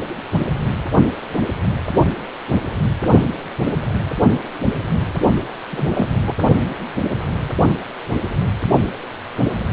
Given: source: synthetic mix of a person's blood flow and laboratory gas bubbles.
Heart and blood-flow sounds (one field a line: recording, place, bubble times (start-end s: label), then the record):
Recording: Doppler ultrasound of blood flow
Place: precordium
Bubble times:
5.71-6.07 s: bubbles
6.27-6.33 s: bubbles
From the record:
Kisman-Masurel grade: 212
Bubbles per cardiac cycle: several, 3 to 8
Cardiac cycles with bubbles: 1 to 10%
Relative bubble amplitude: moderate (0.250 to 0.450)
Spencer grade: 1 (occasional bubble signal discernible with the cardiac motion signal, with majority of cardiac periods free of bubbles)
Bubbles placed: only in the low amplitude regions of the cardiac cycle